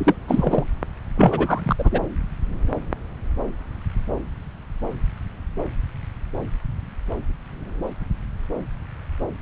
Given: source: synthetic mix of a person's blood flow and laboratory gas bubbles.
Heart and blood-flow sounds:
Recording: Doppler ultrasound of blood flow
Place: subclavian vein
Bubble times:
0.00-0.14 s: bubbles
0.28-0.65 s: bubbles
1.16-1.76 s: bubbles
1.78-2.00 s: bubbles
From the record:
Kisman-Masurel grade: 223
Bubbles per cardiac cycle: several, 3 to 8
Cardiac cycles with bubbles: 10 to 50%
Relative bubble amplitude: loud (0.450 to 0.775)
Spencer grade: 2 (many but less than half of the cardiac periods contain bubble signals, singularly or in groups)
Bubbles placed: anywhere in the cardiac cycle

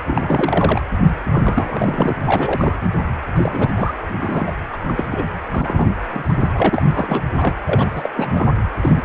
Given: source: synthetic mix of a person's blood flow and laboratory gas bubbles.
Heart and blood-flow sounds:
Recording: Doppler ultrasound of blood flow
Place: precordium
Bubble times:
0.07-0.81 s: bubbles
1.24-2.15 s: bubbles
2.24-2.75 s: bubbles
3.34-3.70 s: bubbles
3.75-3.93 s: bubbles
4.19-4.52 s: bubbles
4.73-4.77 s: bubbles
4.87-4.95 s: bubbles
4.97-5.25 s: bubbles
5.50-5.96 s: bubbles
6.12-6.36 s: bubbles
6.40-6.49 s: bubbles
6.53-7.21 s: bubbles
7.37-7.54 s: bubbles
7.66-7.88 s: bubbles
7.95-8.09 s: bubbles
8.15-8.47 s: bubbles
8.80-9.05 s: bubbles
From the record:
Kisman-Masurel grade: 342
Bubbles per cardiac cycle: rolling drumbeat, 9 or more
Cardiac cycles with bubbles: 100%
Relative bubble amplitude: moderate (0.250 to 0.450)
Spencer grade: 3 (all of the cardiac periods contain showers or single bubble signals, but not dominating or overriding the cardiac motion signals)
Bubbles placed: anywhere in the cardiac cycle

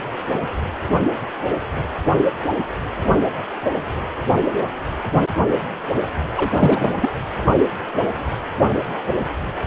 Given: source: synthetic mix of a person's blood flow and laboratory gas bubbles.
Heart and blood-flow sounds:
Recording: Doppler ultrasound of blood flow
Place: precordium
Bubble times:
6.35-6.94 s: bubbles
7.01-7.10 s: bubbles
From the record:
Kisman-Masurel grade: 212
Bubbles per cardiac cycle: several, 3 to 8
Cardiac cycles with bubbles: 1 to 10%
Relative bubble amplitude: moderate (0.250 to 0.450)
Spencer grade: 1 (occasional bubble signal discernible with the cardiac motion signal, with majority of cardiac periods free of bubbles)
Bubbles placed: anywhere in the cardiac cycle

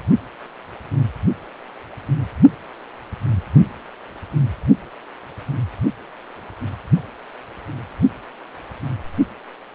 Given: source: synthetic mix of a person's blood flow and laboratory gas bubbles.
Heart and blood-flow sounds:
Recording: Doppler ultrasound of blood flow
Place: precordium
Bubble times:
no bubbles
From the record:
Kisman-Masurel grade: 000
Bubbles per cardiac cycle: 0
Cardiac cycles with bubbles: 0%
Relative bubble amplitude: no bubbles discernible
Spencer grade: 0 (complete lack of bubble signals)

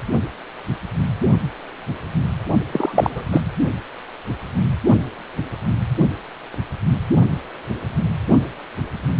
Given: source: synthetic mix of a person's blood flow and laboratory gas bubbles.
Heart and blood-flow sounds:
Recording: Doppler ultrasound of blood flow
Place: precordium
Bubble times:
2.71-3.24 s: bubbles
3.32-3.42 s: bubbles
From the record:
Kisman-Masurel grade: 213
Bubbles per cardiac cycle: several, 3 to 8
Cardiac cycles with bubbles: 1 to 10%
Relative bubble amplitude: loud (0.450 to 0.775)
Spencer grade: 1 (occasional bubble signal discernible with the cardiac motion signal, with majority of cardiac periods free of bubbles)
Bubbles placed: only in the low amplitude regions of the cardiac cycle

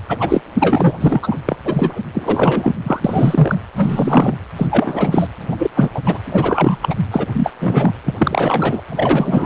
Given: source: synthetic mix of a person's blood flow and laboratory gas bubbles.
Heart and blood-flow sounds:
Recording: Doppler ultrasound of blood flow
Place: precordium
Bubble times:
0.09-0.42 s: bubbles
0.59-0.97 s: bubbles
1.00-1.38 s: bubbles
1.45-1.57 s: bubbles
1.64-2.00 s: bubbles
2.13-2.73 s: bubbles
2.83-3.00 s: bubbles
3.04-3.58 s: bubbles
3.76-4.34 s: bubbles
4.56-4.67 s: bubbles
4.71-5.28 s: bubbles
5.51-5.70 s: bubbles
5.75-5.91 s: bubbles
5.94-6.00 s: bubbles
6.05-6.19 s: bubbles
6.25-6.79 s: bubbles
6.81-6.95 s: bubbles
7.11-7.26 s: bubbles
7.32-7.52 s: bubbles
7.59-7.94 s: bubbles
8.04-8.14 s: bubbles
8.18-8.82 s: bubbles
8.90-9.46 s: bubbles
From the record:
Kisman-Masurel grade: 343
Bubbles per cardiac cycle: rolling drumbeat, 9 or more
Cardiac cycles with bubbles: 100%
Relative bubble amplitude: loud (0.450 to 0.775)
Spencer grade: 3 (all of the cardiac periods contain showers or single bubble signals, but not dominating or overriding the cardiac motion signals)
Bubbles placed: anywhere in the cardiac cycle

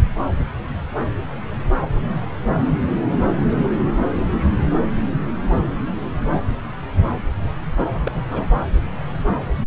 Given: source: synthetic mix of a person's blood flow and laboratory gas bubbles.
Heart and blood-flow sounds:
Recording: Doppler ultrasound of blood flow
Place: subclavian vein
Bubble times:
7.76-7.84 s: bubbles
8.03-8.11 s: bubbles
8.14-8.23 s: bubbles
8.29-8.46 s: bubbles
From the record:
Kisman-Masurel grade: 211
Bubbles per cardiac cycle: several, 3 to 8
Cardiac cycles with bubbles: 1 to 10%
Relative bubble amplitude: barely perceptible (0.100 to 0.250)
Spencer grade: 1 (occasional bubble signal discernible with the cardiac motion signal, with majority of cardiac periods free of bubbles)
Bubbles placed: anywhere in the cardiac cycle

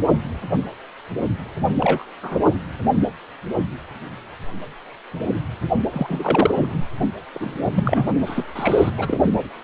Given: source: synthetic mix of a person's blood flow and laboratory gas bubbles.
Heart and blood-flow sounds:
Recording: Doppler ultrasound of blood flow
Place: precordium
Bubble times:
1.80-2.05 s: bubbles
2.23-2.39 s: bubbles
5.89-6.86 s: bubbles
7.34-8.05 s: bubbles
8.25-8.90 s: bubbles
8.97-9.20 s: bubbles
From the record:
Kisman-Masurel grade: 222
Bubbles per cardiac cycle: several, 3 to 8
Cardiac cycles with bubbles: 10 to 50%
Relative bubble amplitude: moderate (0.250 to 0.450)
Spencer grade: 2 (many but less than half of the cardiac periods contain bubble signals, singularly or in groups)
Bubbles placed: only in the low amplitude regions of the cardiac cycle

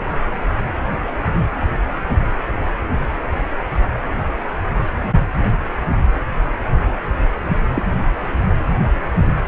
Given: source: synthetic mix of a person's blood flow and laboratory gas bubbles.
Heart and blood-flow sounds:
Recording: Doppler ultrasound of blood flow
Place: precordium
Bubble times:
7.75-7.83 s: bubbles
From the record:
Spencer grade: 2 (many but less than half of the cardiac periods contain bubble signals, singularly or in groups)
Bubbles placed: anywhere in the cardiac cycle

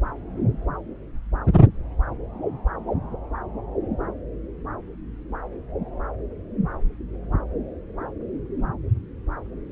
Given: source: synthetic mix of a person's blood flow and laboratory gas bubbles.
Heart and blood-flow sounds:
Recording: Doppler ultrasound of blood flow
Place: subclavian vein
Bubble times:
no bubbles
From the record:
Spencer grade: 0 (complete lack of bubble signals)

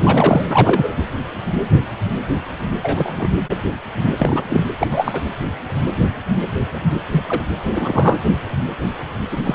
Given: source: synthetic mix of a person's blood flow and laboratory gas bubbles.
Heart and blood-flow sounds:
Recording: Doppler ultrasound of blood flow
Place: precordium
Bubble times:
0.00-0.95 s: bubbles
2.82-3.29 s: bubbles
4.18-4.44 s: bubbles
4.49-4.63 s: bubbles
4.78-4.87 s: bubbles
4.91-5.21 s: bubbles
6.74-6.83 s: bubbles
7.12-7.23 s: bubbles
7.27-7.42 s: bubbles
7.70-8.16 s: bubbles
9.31-9.37 s: bubbles
9.44-9.54 s: bubbles
From the record:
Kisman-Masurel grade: 223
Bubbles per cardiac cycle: several, 3 to 8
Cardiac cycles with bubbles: 10 to 50%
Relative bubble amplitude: loud (0.450 to 0.775)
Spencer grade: 2 (many but less than half of the cardiac periods contain bubble signals, singularly or in groups)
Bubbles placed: anywhere in the cardiac cycle

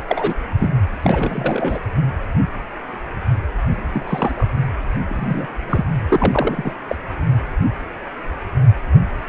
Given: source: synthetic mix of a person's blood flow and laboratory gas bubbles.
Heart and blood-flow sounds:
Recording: Doppler ultrasound of blood flow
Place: precordium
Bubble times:
0.07-0.34 s: bubbles
0.60-0.70 s: bubbles
1.02-1.81 s: bubbles
3.92-4.47 s: bubbles
5.10-5.14 s: bubbles
5.17-5.46 s: bubbles
5.67-5.83 s: bubbles
6.08-6.71 s: bubbles
6.89-6.96 s: bubbles
From the record:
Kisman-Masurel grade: 232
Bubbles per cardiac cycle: several, 3 to 8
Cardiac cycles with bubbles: 50 to 99%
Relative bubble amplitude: moderate (0.250 to 0.450)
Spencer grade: 3 (all of the cardiac periods contain showers or single bubble signals, but not dominating or overriding the cardiac motion signals)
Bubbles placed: anywhere in the cardiac cycle

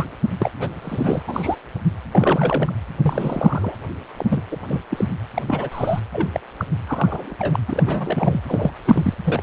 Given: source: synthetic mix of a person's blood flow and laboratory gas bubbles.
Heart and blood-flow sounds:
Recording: Doppler ultrasound of blood flow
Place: precordium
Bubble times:
0.00-0.06 s: bubbles
0.38-0.51 s: bubbles
0.59-0.68 s: bubbles
0.82-1.23 s: bubbles
1.27-1.55 s: bubbles
2.11-2.73 s: bubbles
3.02-3.75 s: bubbles
4.18-4.42 s: bubbles
4.51-4.57 s: bubbles
4.67-4.81 s: bubbles
4.89-5.05 s: bubbles
5.34-5.42 s: bubbles
5.47-5.69 s: bubbles
5.71-6.00 s: bubbles
6.12-6.28 s: bubbles
6.33-6.40 s: bubbles
6.58-6.64 s: bubbles
6.87-7.36 s: bubbles
7.39-7.59 s: bubbles
7.68-8.40 s: bubbles
8.46-8.71 s: bubbles
8.85-9.14 s: bubbles
9.24-9.43 s: bubbles
From the record:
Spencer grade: 3 (all of the cardiac periods contain showers or single bubble signals, but not dominating or overriding the cardiac motion signals)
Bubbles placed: anywhere in the cardiac cycle

